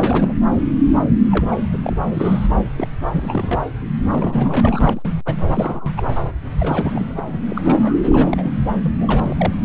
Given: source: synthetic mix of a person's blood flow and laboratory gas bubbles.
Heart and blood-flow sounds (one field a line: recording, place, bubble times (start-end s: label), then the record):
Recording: Doppler ultrasound of blood flow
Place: subclavian vein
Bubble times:
0.00-0.35 s: bubbles
1.31-1.56 s: bubbles
1.73-1.78 s: bubbles
1.83-1.97 s: bubbles
2.06-2.48 s: bubbles
2.77-2.87 s: bubbles
3.02-3.62 s: bubbles
4.12-5.02 s: bubbles
5.25-5.92 s: bubbles
5.96-6.02 s: bubbles
6.59-7.14 s: bubbles
7.17-7.21 s: bubbles
7.27-7.38 s: bubbles
7.48-7.61 s: bubbles
7.64-7.97 s: bubbles
8.02-8.52 s: bubbles
8.83-8.93 s: bubbles
8.99-9.53 s: bubbles
From the record:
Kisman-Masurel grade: 342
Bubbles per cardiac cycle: rolling drumbeat, 9 or more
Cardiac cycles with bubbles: 100%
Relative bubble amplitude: moderate (0.250 to 0.450)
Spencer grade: 3 (all of the cardiac periods contain showers or single bubble signals, but not dominating or overriding the cardiac motion signals)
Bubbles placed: anywhere in the cardiac cycle